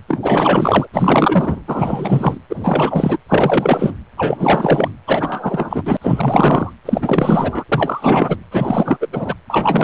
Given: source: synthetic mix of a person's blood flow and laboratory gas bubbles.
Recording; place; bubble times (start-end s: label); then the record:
Doppler ultrasound of blood flow; precordium
0.08-0.20 s: bubbles
0.22-0.88 s: bubbles
0.93-1.61 s: bubbles
1.68-2.38 s: bubbles
2.50-3.17 s: bubbles
3.28-3.94 s: bubbles
4.17-4.90 s: bubbles
5.06-5.82 s: bubbles
5.85-5.97 s: bubbles
6.01-6.72 s: bubbles
6.85-7.64 s: bubbles
7.69-8.37 s: bubbles
8.51-8.97 s: bubbles
9.00-9.08 s: bubbles
9.12-9.35 s: bubbles
9.49-9.84 s: bubbles
From the record:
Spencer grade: 4 (maximum detectable bubble signal sounding continuously throughout systole and diastole of every cardiac period, and overriding the amplitude of the normal cardiac signals); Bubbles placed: anywhere in the cardiac cycle